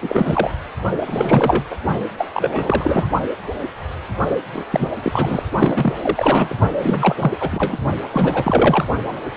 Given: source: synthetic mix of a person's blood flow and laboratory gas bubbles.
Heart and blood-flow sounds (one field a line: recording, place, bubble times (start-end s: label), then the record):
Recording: Doppler ultrasound of blood flow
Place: precordium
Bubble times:
0.02-0.51 s: bubbles
1.05-1.63 s: bubbles
1.70-1.77 s: bubbles
2.17-2.27 s: bubbles
2.33-3.07 s: bubbles
4.53-4.64 s: bubbles
4.71-4.89 s: bubbles
5.02-5.43 s: bubbles
5.53-5.93 s: bubbles
6.02-6.54 s: bubbles
6.82-7.35 s: bubbles
7.39-7.76 s: bubbles
8.11-8.85 s: bubbles
From the record:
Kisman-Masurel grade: 333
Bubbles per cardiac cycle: rolling drumbeat, 9 or more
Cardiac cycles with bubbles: 50 to 99%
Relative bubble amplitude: loud (0.450 to 0.775)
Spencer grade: 3 (all of the cardiac periods contain showers or single bubble signals, but not dominating or overriding the cardiac motion signals)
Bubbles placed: only in the low amplitude regions of the cardiac cycle